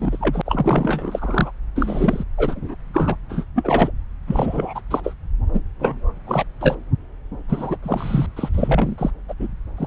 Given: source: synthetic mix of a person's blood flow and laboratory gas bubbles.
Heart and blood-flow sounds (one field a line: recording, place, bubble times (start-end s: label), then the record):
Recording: Doppler ultrasound of blood flow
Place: subclavian vein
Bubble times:
0.00-0.41 s: bubbles
0.46-1.51 s: bubbles
1.75-2.24 s: bubbles
2.37-2.75 s: bubbles
2.94-3.15 s: bubbles
3.29-3.44 s: bubbles
3.55-3.91 s: bubbles
4.27-4.80 s: bubbles
4.91-5.13 s: bubbles
5.53-5.62 s: bubbles
5.79-6.13 s: bubbles
6.25-6.44 s: bubbles
6.60-6.76 s: bubbles
7.48-7.76 s: bubbles
7.83-8.27 s: bubbles
8.36-9.11 s: bubbles
9.28-9.34 s: bubbles
9.39-9.48 s: bubbles
9.77-9.86 s: bubbles
From the record:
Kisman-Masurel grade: 343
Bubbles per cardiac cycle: rolling drumbeat, 9 or more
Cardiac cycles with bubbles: 100%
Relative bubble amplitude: loud (0.450 to 0.775)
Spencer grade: 3 (all of the cardiac periods contain showers or single bubble signals, but not dominating or overriding the cardiac motion signals)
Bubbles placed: anywhere in the cardiac cycle